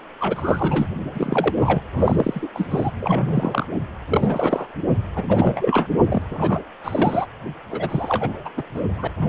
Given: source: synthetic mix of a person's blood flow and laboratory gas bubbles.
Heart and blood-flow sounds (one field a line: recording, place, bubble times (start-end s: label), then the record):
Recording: Doppler ultrasound of blood flow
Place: precordium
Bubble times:
0.20-0.87 s: bubbles
1.14-1.81 s: bubbles
1.93-2.50 s: bubbles
2.54-2.91 s: bubbles
3.01-3.66 s: bubbles
4.08-4.67 s: bubbles
5.15-5.24 s: bubbles
5.29-5.87 s: bubbles
6.04-6.22 s: bubbles
6.32-6.61 s: bubbles
6.83-7.28 s: bubbles
7.71-8.49 s: bubbles
8.57-8.63 s: bubbles
8.75-8.81 s: bubbles
8.96-9.08 s: bubbles
9.17-9.29 s: bubbles
From the record:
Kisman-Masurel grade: 342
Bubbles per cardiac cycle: rolling drumbeat, 9 or more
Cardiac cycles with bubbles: 100%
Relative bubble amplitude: moderate (0.250 to 0.450)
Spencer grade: 3 (all of the cardiac periods contain showers or single bubble signals, but not dominating or overriding the cardiac motion signals)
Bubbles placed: anywhere in the cardiac cycle